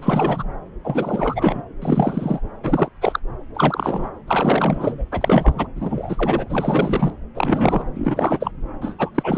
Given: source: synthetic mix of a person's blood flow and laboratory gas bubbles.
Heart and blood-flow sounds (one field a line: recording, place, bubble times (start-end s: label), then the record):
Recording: Doppler ultrasound of blood flow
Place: subclavian vein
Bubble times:
0.00-0.43 s: bubbles
0.83-1.62 s: bubbles
1.81-2.41 s: bubbles
2.63-2.90 s: bubbles
3.01-3.19 s: bubbles
3.54-4.11 s: bubbles
4.27-5.04 s: bubbles
5.12-5.67 s: bubbles
5.75-7.13 s: bubbles
7.35-7.85 s: bubbles
7.95-8.51 s: bubbles
8.81-8.94 s: bubbles
8.98-9.11 s: bubbles
9.14-9.38 s: bubbles
From the record:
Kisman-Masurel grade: 343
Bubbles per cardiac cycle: rolling drumbeat, 9 or more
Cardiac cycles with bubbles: 100%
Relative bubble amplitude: loud (0.450 to 0.775)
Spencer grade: 3 (all of the cardiac periods contain showers or single bubble signals, but not dominating or overriding the cardiac motion signals)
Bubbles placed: anywhere in the cardiac cycle